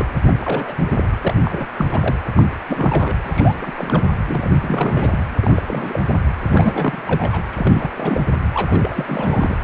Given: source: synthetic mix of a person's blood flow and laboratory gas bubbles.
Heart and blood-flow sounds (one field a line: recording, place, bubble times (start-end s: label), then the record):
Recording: Doppler ultrasound of blood flow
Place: precordium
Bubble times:
0.00-0.09 s: bubbles
0.27-0.34 s: bubbles
0.39-0.89 s: bubbles
0.91-1.18 s: bubbles
1.21-1.34 s: bubbles
1.45-1.67 s: bubbles
1.78-1.86 s: bubbles
1.92-2.18 s: bubbles
2.35-2.43 s: bubbles
2.67-3.16 s: bubbles
3.23-3.55 s: bubbles
3.58-4.12 s: bubbles
4.27-4.53 s: bubbles
4.61-5.25 s: bubbles
5.40-5.62 s: bubbles
5.66-5.99 s: bubbles
6.07-6.15 s: bubbles
6.47-7.41 s: bubbles
7.50-7.91 s: bubbles
7.94-8.21 s: bubbles
8.54-9.55 s: bubbles
9.62-9.64 s: bubbles
From the record:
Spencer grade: 3 (all of the cardiac periods contain showers or single bubble signals, but not dominating or overriding the cardiac motion signals)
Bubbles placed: anywhere in the cardiac cycle